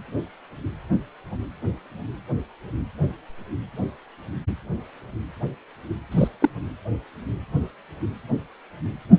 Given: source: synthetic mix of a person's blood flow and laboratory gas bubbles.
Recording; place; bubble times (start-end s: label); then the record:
Doppler ultrasound of blood flow; precordium
6.11-6.28 s: bubbles
6.40-6.49 s: bubbles
From the record:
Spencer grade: 1 (occasional bubble signal discernible with the cardiac motion signal, with majority of cardiac periods free of bubbles); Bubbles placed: anywhere in the cardiac cycle